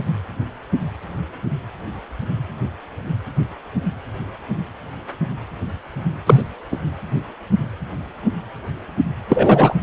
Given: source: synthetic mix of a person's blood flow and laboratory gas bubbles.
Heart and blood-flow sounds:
Doppler ultrasound of blood flow; precordium
6.26-6.42 s: bubbles
6.71-6.76 s: bubbles
9.29-9.74 s: bubbles
From the record:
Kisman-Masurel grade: 213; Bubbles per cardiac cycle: several, 3 to 8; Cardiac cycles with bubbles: 1 to 10%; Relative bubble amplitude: loud (0.450 to 0.775); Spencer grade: 1 (occasional bubble signal discernible with the cardiac motion signal, with majority of cardiac periods free of bubbles); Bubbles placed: anywhere in the cardiac cycle

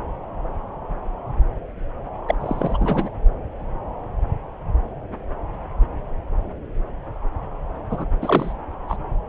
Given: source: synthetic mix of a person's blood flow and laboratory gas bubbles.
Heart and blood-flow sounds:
Doppler ultrasound of blood flow; subclavian vein
2.27-2.35 s: bubbles
2.40-3.09 s: bubbles
7.89-8.04 s: bubbles
8.21-8.53 s: bubbles
8.88-8.96 s: bubbles
From the record:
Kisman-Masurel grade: 222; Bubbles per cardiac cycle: several, 3 to 8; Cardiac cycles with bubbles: 10 to 50%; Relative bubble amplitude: moderate (0.250 to 0.450); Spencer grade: 2 (many but less than half of the cardiac periods contain bubble signals, singularly or in groups); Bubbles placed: anywhere in the cardiac cycle

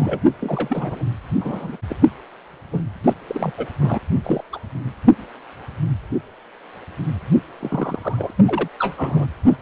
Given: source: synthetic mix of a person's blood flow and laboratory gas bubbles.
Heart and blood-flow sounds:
Doppler ultrasound of blood flow; precordium
0.00-0.32 s: bubbles
0.41-1.05 s: bubbles
1.40-1.77 s: bubbles
1.89-1.96 s: bubbles
2.73-2.81 s: bubbles
3.04-3.13 s: bubbles
3.27-3.52 s: bubbles
3.57-3.67 s: bubbles
3.81-3.98 s: bubbles
4.24-4.42 s: bubbles
4.53-4.58 s: bubbles
7.60-8.30 s: bubbles
8.37-8.68 s: bubbles
8.79-9.26 s: bubbles
9.47-9.56 s: bubbles
From the record:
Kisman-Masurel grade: 232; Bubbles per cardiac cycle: several, 3 to 8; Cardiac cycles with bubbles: 50 to 99%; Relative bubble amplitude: moderate (0.250 to 0.450); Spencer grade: 3 (all of the cardiac periods contain showers or single bubble signals, but not dominating or overriding the cardiac motion signals); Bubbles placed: anywhere in the cardiac cycle

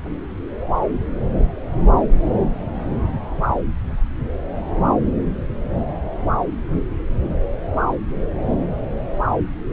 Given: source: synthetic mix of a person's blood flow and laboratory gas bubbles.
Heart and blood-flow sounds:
Doppler ultrasound of blood flow; subclavian vein
no bubbles
From the record:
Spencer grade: 0 (complete lack of bubble signals)

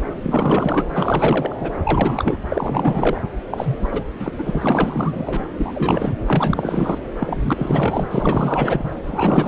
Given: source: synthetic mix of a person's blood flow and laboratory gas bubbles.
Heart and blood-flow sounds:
Doppler ultrasound of blood flow; subclavian vein
0.23-0.84 s: bubbles
0.94-1.72 s: bubbles
1.83-2.38 s: bubbles
2.49-3.21 s: bubbles
3.50-3.89 s: bubbles
3.92-4.04 s: bubbles
4.19-4.32 s: bubbles
4.38-5.46 s: bubbles
5.57-6.14 s: bubbles
6.27-6.99 s: bubbles
7.20-8.94 s: bubbles
9.04-9.48 s: bubbles
From the record:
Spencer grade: 4 (maximum detectable bubble signal sounding continuously throughout systole and diastole of every cardiac period, and overriding the amplitude of the normal cardiac signals); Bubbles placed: anywhere in the cardiac cycle

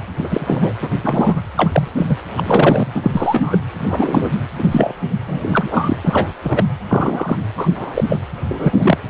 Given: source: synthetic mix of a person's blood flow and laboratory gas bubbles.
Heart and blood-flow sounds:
Doppler ultrasound of blood flow; precordium
0.23-0.73 s: bubbles
0.81-0.90 s: bubbles
1.03-1.42 s: bubbles
1.56-1.88 s: bubbles
1.96-2.16 s: bubbles
2.37-2.86 s: bubbles
2.94-3.59 s: bubbles
3.73-4.31 s: bubbles
4.59-4.93 s: bubbles
5.27-5.97 s: bubbles
6.04-6.28 s: bubbles
6.43-6.64 s: bubbles
6.88-7.38 s: bubbles
7.57-7.68 s: bubbles
7.75-8.04 s: bubbles
8.08-8.18 s: bubbles
8.49-8.97 s: bubbles
From the record:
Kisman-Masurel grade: 243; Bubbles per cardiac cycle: several, 3 to 8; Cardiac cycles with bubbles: 100%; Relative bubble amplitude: loud (0.450 to 0.775); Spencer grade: 3 (all of the cardiac periods contain showers or single bubble signals, but not dominating or overriding the cardiac motion signals); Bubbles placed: anywhere in the cardiac cycle

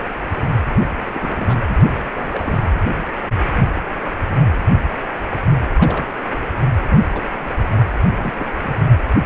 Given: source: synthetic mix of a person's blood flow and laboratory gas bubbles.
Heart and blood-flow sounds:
Doppler ultrasound of blood flow; precordium
0.80-1.60 s: bubbles
1.67-2.59 s: bubbles
5.73-6.21 s: bubbles
6.89-7.22 s: bubbles
7.46-7.55 s: bubbles
7.71-7.77 s: bubbles
8.16-8.33 s: bubbles
8.36-8.46 s: bubbles
8.57-8.77 s: bubbles
From the record:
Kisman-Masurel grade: 221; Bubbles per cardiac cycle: several, 3 to 8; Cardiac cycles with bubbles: 10 to 50%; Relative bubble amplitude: barely perceptible (0.100 to 0.250); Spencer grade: 2 (many but less than half of the cardiac periods contain bubble signals, singularly or in groups); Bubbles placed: anywhere in the cardiac cycle

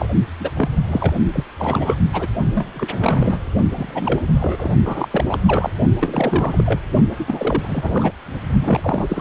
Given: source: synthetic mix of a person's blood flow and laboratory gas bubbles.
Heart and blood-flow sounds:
Doppler ultrasound of blood flow; precordium
0.00-0.05 s: bubbles
0.40-0.51 s: bubbles
0.56-0.69 s: bubbles
0.87-1.13 s: bubbles
1.32-1.44 s: bubbles
1.58-1.98 s: bubbles
2.12-2.28 s: bubbles
2.54-2.69 s: bubbles
2.75-3.40 s: bubbles
3.75-4.20 s: bubbles
4.33-4.74 s: bubbles
4.84-5.25 s: bubbles
5.27-5.39 s: bubbles
5.47-5.70 s: bubbles
6.01-6.79 s: bubbles
7.19-7.25 s: bubbles
7.28-8.12 s: bubbles
8.61-9.21 s: bubbles
From the record:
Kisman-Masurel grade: 342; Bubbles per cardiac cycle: rolling drumbeat, 9 or more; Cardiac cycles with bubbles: 100%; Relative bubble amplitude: moderate (0.250 to 0.450); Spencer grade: 3 (all of the cardiac periods contain showers or single bubble signals, but not dominating or overriding the cardiac motion signals); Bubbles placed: only in the low amplitude regions of the cardiac cycle

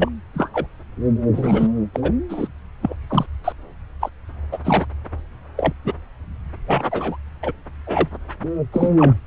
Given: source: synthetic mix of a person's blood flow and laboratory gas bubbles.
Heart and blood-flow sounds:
Doppler ultrasound of blood flow; subclavian vein
0.00-0.09 s: bubbles
0.34-0.50 s: bubbles
0.53-0.67 s: bubbles
1.32-1.67 s: bubbles
1.94-2.11 s: bubbles
2.29-2.48 s: bubbles
2.82-2.96 s: bubbles
3.09-3.26 s: bubbles
3.44-3.52 s: bubbles
4.01-4.10 s: bubbles
4.52-4.58 s: bubbles
4.65-4.86 s: bubbles
5.57-5.73 s: bubbles
5.85-5.93 s: bubbles
6.67-6.83 s: bubbles
6.91-7.17 s: bubbles
7.43-7.52 s: bubbles
7.87-8.08 s: bubbles
8.72-8.90 s: bubbles
8.98-9.13 s: bubbles
From the record:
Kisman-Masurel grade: 242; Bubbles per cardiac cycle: several, 3 to 8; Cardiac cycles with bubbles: 100%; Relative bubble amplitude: moderate (0.250 to 0.450); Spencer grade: 3 (all of the cardiac periods contain showers or single bubble signals, but not dominating or overriding the cardiac motion signals); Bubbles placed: anywhere in the cardiac cycle

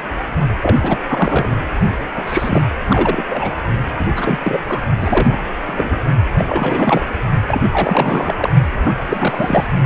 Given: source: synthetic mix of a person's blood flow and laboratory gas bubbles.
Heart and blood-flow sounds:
Doppler ultrasound of blood flow; precordium
0.62-0.76 s: bubbles
0.81-0.97 s: bubbles
1.07-1.66 s: bubbles
2.15-2.62 s: bubbles
2.87-3.23 s: bubbles
3.29-3.55 s: bubbles
3.98-4.05 s: bubbles
4.16-4.39 s: bubbles
4.43-4.59 s: bubbles
4.69-4.81 s: bubbles
5.01-5.37 s: bubbles
5.67-5.99 s: bubbles
6.38-7.05 s: bubbles
7.47-7.61 s: bubbles
7.70-8.35 s: bubbles
8.38-8.50 s: bubbles
8.81-9.67 s: bubbles
From the record:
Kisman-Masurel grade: 332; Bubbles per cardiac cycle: rolling drumbeat, 9 or more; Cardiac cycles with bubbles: 50 to 99%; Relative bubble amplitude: moderate (0.250 to 0.450); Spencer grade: 3 (all of the cardiac periods contain showers or single bubble signals, but not dominating or overriding the cardiac motion signals); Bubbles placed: only in the low amplitude regions of the cardiac cycle

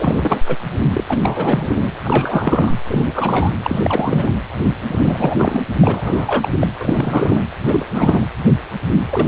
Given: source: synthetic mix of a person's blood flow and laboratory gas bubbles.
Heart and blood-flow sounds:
Doppler ultrasound of blood flow; precordium
0.00-0.42 s: bubbles
0.46-0.57 s: bubbles
0.93-1.04 s: bubbles
1.08-1.92 s: bubbles
2.04-2.72 s: bubbles
2.87-3.51 s: bubbles
3.62-4.31 s: bubbles
4.84-5.63 s: bubbles
5.81-6.48 s: bubbles
6.60-6.67 s: bubbles
6.80-7.45 s: bubbles
7.67-7.85 s: bubbles
7.92-8.27 s: bubbles
9.10-9.28 s: bubbles
From the record:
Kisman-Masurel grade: 332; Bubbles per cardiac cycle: rolling drumbeat, 9 or more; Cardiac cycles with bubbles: 50 to 99%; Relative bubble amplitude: moderate (0.250 to 0.450); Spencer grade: 3 (all of the cardiac periods contain showers or single bubble signals, but not dominating or overriding the cardiac motion signals); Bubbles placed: anywhere in the cardiac cycle

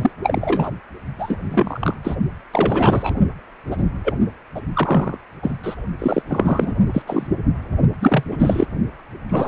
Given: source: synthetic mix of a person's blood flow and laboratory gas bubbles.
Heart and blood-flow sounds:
Doppler ultrasound of blood flow; precordium
0.01-0.11 s: bubbles
0.22-0.71 s: bubbles
1.19-1.36 s: bubbles
1.50-1.97 s: bubbles
2.04-2.16 s: bubbles
2.51-3.14 s: bubbles
3.71-3.83 s: bubbles
4.04-4.17 s: bubbles
4.55-4.61 s: bubbles
4.73-5.17 s: bubbles
5.42-5.56 s: bubbles
5.63-5.75 s: bubbles
5.98-6.22 s: bubbles
6.27-6.72 s: bubbles
6.93-7.02 s: bubbles
7.06-7.27 s: bubbles
8.00-8.23 s: bubbles
8.31-8.66 s: bubbles
9.29-9.48 s: bubbles
From the record:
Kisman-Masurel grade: 243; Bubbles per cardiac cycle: several, 3 to 8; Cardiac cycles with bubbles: 100%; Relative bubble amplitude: loud (0.450 to 0.775); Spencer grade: 3 (all of the cardiac periods contain showers or single bubble signals, but not dominating or overriding the cardiac motion signals); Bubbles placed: only in the low amplitude regions of the cardiac cycle

